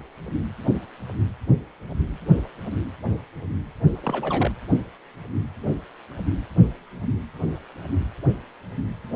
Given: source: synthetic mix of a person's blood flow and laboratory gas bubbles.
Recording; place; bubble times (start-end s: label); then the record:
Doppler ultrasound of blood flow; precordium
4.01-4.51 s: bubbles
From the record:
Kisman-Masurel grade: 211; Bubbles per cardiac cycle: several, 3 to 8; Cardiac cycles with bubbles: 1 to 10%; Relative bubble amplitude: barely perceptible (0.100 to 0.250); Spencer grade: 1 (occasional bubble signal discernible with the cardiac motion signal, with majority of cardiac periods free of bubbles); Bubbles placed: only in the low amplitude regions of the cardiac cycle